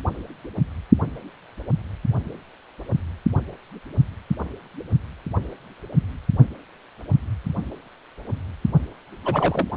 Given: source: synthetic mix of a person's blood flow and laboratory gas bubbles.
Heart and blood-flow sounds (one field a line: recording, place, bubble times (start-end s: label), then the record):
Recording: Doppler ultrasound of blood flow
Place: precordium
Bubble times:
9.24-9.67 s: bubbles
From the record:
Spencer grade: 1 (occasional bubble signal discernible with the cardiac motion signal, with majority of cardiac periods free of bubbles)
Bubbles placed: only in the low amplitude regions of the cardiac cycle